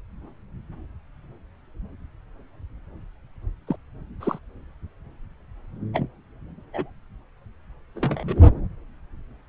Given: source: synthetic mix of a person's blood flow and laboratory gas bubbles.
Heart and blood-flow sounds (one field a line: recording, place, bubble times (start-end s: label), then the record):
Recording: Doppler ultrasound of blood flow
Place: subclavian vein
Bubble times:
3.67-3.76 s: bubbles
4.20-4.38 s: bubbles
5.93-6.07 s: bubbles
6.73-6.90 s: bubbles
7.95-8.44 s: bubbles
From the record:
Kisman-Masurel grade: 122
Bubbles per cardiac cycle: 1 to 2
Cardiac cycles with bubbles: 10 to 50%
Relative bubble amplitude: moderate (0.250 to 0.450)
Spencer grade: 2 (many but less than half of the cardiac periods contain bubble signals, singularly or in groups)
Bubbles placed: anywhere in the cardiac cycle